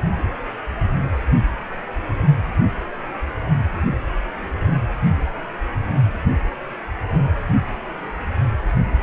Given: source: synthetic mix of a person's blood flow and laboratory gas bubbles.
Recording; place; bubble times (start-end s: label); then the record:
Doppler ultrasound of blood flow; precordium
no bubbles
From the record:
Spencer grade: 0 (complete lack of bubble signals)